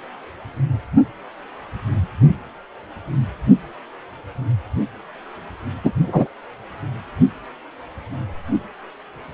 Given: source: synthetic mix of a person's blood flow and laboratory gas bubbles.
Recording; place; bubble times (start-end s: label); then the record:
Doppler ultrasound of blood flow; precordium
5.84-5.92 s: bubbles
6.07-6.28 s: bubbles
From the record:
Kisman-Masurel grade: 113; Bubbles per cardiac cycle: 1 to 2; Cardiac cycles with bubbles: 1 to 10%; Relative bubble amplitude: loud (0.450 to 0.775); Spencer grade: 1 (occasional bubble signal discernible with the cardiac motion signal, with majority of cardiac periods free of bubbles); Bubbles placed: anywhere in the cardiac cycle